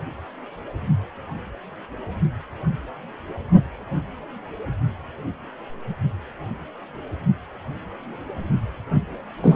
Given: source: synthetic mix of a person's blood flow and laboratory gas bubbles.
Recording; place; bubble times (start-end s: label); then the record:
Doppler ultrasound of blood flow; precordium
9.42-9.56 s: bubbles
From the record:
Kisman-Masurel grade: 213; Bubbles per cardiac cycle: several, 3 to 8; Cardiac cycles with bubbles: 1 to 10%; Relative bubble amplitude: loud (0.450 to 0.775); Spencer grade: 1 (occasional bubble signal discernible with the cardiac motion signal, with majority of cardiac periods free of bubbles); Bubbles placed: anywhere in the cardiac cycle